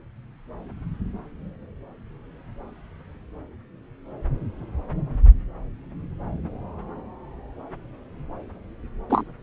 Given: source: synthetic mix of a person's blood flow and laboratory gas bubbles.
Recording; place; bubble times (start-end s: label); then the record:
Doppler ultrasound of blood flow; subclavian vein
9.10-9.24 s: bubbles
From the record:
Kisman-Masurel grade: 123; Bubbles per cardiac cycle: 1 to 2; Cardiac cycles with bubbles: 10 to 50%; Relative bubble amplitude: loud (0.450 to 0.775); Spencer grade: 2 (many but less than half of the cardiac periods contain bubble signals, singularly or in groups); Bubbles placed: anywhere in the cardiac cycle